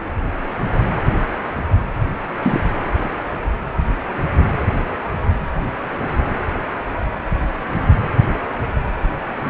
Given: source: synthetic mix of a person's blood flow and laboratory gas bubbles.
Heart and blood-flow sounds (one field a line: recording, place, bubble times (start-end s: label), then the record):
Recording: Doppler ultrasound of blood flow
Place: precordium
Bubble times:
2.42-2.60 s: bubbles
From the record:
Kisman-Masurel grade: 113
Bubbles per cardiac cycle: 1 to 2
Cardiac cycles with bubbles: 1 to 10%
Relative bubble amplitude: loud (0.450 to 0.775)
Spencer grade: 1 (occasional bubble signal discernible with the cardiac motion signal, with majority of cardiac periods free of bubbles)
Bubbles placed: anywhere in the cardiac cycle